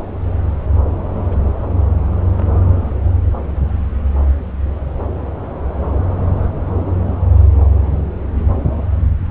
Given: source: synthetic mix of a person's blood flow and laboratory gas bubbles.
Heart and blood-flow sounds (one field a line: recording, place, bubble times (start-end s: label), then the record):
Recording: Doppler ultrasound of blood flow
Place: subclavian vein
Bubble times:
1.12-1.20 s: bubbles
1.31-1.36 s: bubbles
2.25-2.62 s: bubbles
2.67-2.71 s: bubbles
From the record:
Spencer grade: 2 (many but less than half of the cardiac periods contain bubble signals, singularly or in groups)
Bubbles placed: anywhere in the cardiac cycle